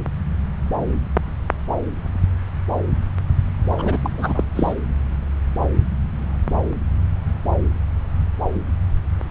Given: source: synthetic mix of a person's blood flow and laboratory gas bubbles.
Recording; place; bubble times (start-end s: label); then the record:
Doppler ultrasound of blood flow; subclavian vein
3.63-3.99 s: bubbles
4.02-4.44 s: bubbles
4.55-4.73 s: bubbles
From the record:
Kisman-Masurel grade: 212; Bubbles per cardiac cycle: several, 3 to 8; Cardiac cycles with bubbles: 1 to 10%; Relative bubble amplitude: moderate (0.250 to 0.450); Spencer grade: 1 (occasional bubble signal discernible with the cardiac motion signal, with majority of cardiac periods free of bubbles); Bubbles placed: anywhere in the cardiac cycle